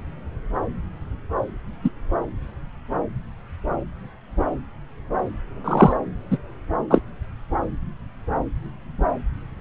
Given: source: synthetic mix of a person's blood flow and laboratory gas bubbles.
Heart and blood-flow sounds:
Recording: Doppler ultrasound of blood flow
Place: subclavian vein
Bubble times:
1.84-1.90 s: bubbles
5.64-5.92 s: bubbles
6.30-6.38 s: bubbles
6.90-7.00 s: bubbles
From the record:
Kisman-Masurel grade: 123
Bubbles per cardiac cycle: 1 to 2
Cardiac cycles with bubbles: 10 to 50%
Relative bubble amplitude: loud (0.450 to 0.775)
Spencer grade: 2 (many but less than half of the cardiac periods contain bubble signals, singularly or in groups)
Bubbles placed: anywhere in the cardiac cycle

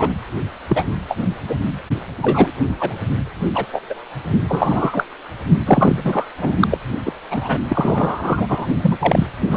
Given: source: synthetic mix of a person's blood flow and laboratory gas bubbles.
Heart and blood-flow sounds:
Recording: Doppler ultrasound of blood flow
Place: precordium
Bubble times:
0.00-0.14 s: bubbles
0.68-0.89 s: bubbles
1.08-1.18 s: bubbles
1.48-1.55 s: bubbles
2.22-2.51 s: bubbles
2.78-3.01 s: bubbles
3.54-3.67 s: bubbles
3.72-3.81 s: bubbles
3.89-3.94 s: bubbles
4.48-5.04 s: bubbles
5.66-6.26 s: bubbles
6.40-6.68 s: bubbles
6.71-6.78 s: bubbles
7.05-7.12 s: bubbles
7.30-7.58 s: bubbles
7.69-8.66 s: bubbles
8.82-8.97 s: bubbles
9.00-9.27 s: bubbles
9.47-9.57 s: bubbles
From the record:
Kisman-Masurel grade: 233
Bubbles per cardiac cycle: several, 3 to 8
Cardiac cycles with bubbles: 50 to 99%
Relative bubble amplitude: loud (0.450 to 0.775)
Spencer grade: 3 (all of the cardiac periods contain showers or single bubble signals, but not dominating or overriding the cardiac motion signals)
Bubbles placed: only in the low amplitude regions of the cardiac cycle

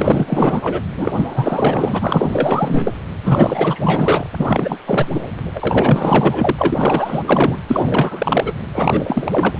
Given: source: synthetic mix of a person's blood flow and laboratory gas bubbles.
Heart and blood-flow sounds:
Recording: Doppler ultrasound of blood flow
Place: precordium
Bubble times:
0.00-0.84 s: bubbles
0.97-2.93 s: bubbles
3.22-4.27 s: bubbles
4.38-4.78 s: bubbles
4.86-5.08 s: bubbles
5.14-5.26 s: bubbles
5.54-6.56 s: bubbles
6.58-7.57 s: bubbles
7.68-8.53 s: bubbles
8.73-9.59 s: bubbles
From the record:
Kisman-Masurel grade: 444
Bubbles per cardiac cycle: continuous sound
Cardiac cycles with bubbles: 100%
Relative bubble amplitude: maximal (0.775 to 0.999)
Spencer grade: 4 (maximum detectable bubble signal sounding continuously throughout systole and diastole of every cardiac period, and overriding the amplitude of the normal cardiac signals)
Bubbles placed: anywhere in the cardiac cycle

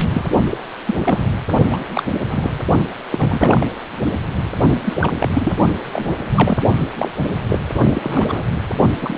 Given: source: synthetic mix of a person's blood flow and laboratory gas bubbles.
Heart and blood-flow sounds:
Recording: Doppler ultrasound of blood flow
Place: precordium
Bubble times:
0.00-0.05 s: bubbles
0.14-0.25 s: bubbles
0.51-0.57 s: bubbles
0.86-0.97 s: bubbles
1.03-1.24 s: bubbles
1.70-1.79 s: bubbles
1.91-2.03 s: bubbles
2.30-2.51 s: bubbles
3.11-3.69 s: bubbles
4.83-4.95 s: bubbles
5.00-5.31 s: bubbles
5.35-5.51 s: bubbles
5.92-6.06 s: bubbles
6.29-6.58 s: bubbles
6.96-7.08 s: bubbles
7.49-7.58 s: bubbles
7.75-7.81 s: bubbles
7.94-8.44 s: bubbles
9.00-9.18 s: bubbles
From the record:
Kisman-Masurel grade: 242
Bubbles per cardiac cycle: several, 3 to 8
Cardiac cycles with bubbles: 100%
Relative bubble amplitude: moderate (0.250 to 0.450)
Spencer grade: 3 (all of the cardiac periods contain showers or single bubble signals, but not dominating or overriding the cardiac motion signals)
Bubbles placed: only in the low amplitude regions of the cardiac cycle

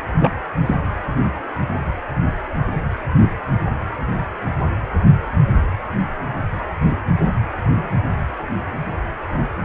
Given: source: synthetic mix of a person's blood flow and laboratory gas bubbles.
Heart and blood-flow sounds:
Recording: Doppler ultrasound of blood flow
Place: precordium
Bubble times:
0.19-0.30 s: bubbles
0.66-0.76 s: bubbles
3.21-3.29 s: bubbles
From the record:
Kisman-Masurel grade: 122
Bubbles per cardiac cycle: 1 to 2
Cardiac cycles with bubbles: 10 to 50%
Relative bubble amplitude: moderate (0.250 to 0.450)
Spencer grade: 2 (many but less than half of the cardiac periods contain bubble signals, singularly or in groups)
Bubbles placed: anywhere in the cardiac cycle

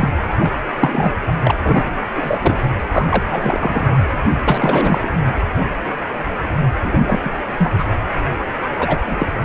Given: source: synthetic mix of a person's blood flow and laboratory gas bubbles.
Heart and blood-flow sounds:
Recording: Doppler ultrasound of blood flow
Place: precordium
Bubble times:
0.00-0.09 s: bubbles
0.38-0.52 s: bubbles
0.80-1.12 s: bubbles
1.43-1.52 s: bubbles
1.62-1.91 s: bubbles
2.15-2.39 s: bubbles
2.42-2.56 s: bubbles
2.91-3.06 s: bubbles
3.09-3.23 s: bubbles
3.31-4.04 s: bubbles
4.45-5.08 s: bubbles
6.83-7.18 s: bubbles
7.24-7.31 s: bubbles
7.58-7.84 s: bubbles
8.79-8.98 s: bubbles
9.07-9.27 s: bubbles
From the record:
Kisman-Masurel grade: 233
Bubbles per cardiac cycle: several, 3 to 8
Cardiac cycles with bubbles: 50 to 99%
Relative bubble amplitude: loud (0.450 to 0.775)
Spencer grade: 3 (all of the cardiac periods contain showers or single bubble signals, but not dominating or overriding the cardiac motion signals)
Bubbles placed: anywhere in the cardiac cycle

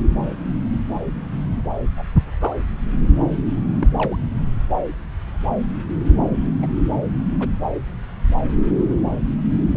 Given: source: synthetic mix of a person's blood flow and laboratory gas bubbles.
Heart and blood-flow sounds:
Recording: Doppler ultrasound of blood flow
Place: subclavian vein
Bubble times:
1.96-2.03 s: bubbles
2.41-2.54 s: bubbles
3.79-3.88 s: bubbles
3.97-4.17 s: bubbles
6.62-6.67 s: bubbles
7.40-7.48 s: bubbles
From the record:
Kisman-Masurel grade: 121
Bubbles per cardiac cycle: 1 to 2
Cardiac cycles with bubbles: 10 to 50%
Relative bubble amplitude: barely perceptible (0.100 to 0.250)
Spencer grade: 2 (many but less than half of the cardiac periods contain bubble signals, singularly or in groups)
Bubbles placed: anywhere in the cardiac cycle

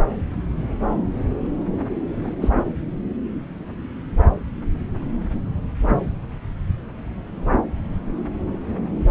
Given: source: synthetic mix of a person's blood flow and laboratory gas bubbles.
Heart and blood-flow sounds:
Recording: Doppler ultrasound of blood flow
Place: subclavian vein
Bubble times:
2.10-2.33 s: bubbles
2.41-2.50 s: bubbles
From the record:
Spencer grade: 2 (many but less than half of the cardiac periods contain bubble signals, singularly or in groups)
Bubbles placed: anywhere in the cardiac cycle

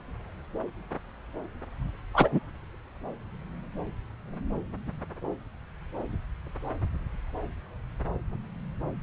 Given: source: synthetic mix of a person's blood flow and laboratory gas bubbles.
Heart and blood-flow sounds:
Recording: Doppler ultrasound of blood flow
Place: subclavian vein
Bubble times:
2.13-2.29 s: bubbles
2.32-2.40 s: bubbles
From the record:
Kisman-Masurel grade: 213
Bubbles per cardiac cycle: several, 3 to 8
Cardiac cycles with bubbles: 1 to 10%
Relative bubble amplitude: loud (0.450 to 0.775)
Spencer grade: 1 (occasional bubble signal discernible with the cardiac motion signal, with majority of cardiac periods free of bubbles)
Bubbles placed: anywhere in the cardiac cycle

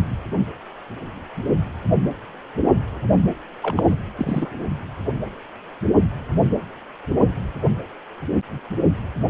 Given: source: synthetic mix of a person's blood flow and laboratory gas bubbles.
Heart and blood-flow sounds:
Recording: Doppler ultrasound of blood flow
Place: precordium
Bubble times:
3.62-3.83 s: bubbles
3.90-3.97 s: bubbles
4.17-4.50 s: bubbles
From the record:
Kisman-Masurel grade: 212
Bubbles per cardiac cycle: several, 3 to 8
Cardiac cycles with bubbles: 1 to 10%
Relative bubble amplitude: moderate (0.250 to 0.450)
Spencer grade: 1 (occasional bubble signal discernible with the cardiac motion signal, with majority of cardiac periods free of bubbles)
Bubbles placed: only in the low amplitude regions of the cardiac cycle

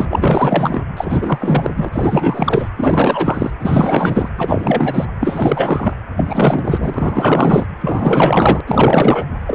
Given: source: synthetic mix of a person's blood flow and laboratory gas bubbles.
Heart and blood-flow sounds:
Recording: Doppler ultrasound of blood flow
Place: precordium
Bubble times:
0.00-0.82 s: bubbles
0.97-1.71 s: bubbles
1.76-1.89 s: bubbles
1.92-2.69 s: bubbles
2.76-3.50 s: bubbles
3.60-4.29 s: bubbles
4.37-5.05 s: bubbles
5.20-5.93 s: bubbles
6.16-7.65 s: bubbles
7.81-8.60 s: bubbles
8.66-9.26 s: bubbles
9.46-9.55 s: bubbles
From the record:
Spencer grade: 4 (maximum detectable bubble signal sounding continuously throughout systole and diastole of every cardiac period, and overriding the amplitude of the normal cardiac signals)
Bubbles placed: anywhere in the cardiac cycle

